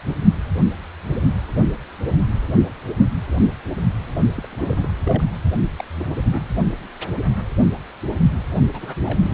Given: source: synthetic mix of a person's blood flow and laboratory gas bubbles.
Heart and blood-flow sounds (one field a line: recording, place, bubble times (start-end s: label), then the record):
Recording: Doppler ultrasound of blood flow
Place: precordium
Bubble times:
4.36-4.46 s: bubbles
4.50-4.89 s: bubbles
5.04-5.25 s: bubbles
5.77-5.84 s: bubbles
5.93-6.43 s: bubbles
8.72-8.96 s: bubbles
9.05-9.34 s: bubbles
From the record:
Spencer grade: 2 (many but less than half of the cardiac periods contain bubble signals, singularly or in groups)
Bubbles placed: only in the low amplitude regions of the cardiac cycle